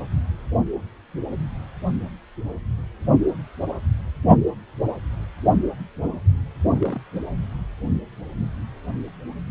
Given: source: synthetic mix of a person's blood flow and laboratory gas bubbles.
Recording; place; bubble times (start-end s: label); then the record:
Doppler ultrasound of blood flow; precordium
6.70-7.01 s: bubbles
From the record:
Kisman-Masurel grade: 111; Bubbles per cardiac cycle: 1 to 2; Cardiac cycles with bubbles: 1 to 10%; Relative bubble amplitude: barely perceptible (0.100 to 0.250); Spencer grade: 1 (occasional bubble signal discernible with the cardiac motion signal, with majority of cardiac periods free of bubbles); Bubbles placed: only in the low amplitude regions of the cardiac cycle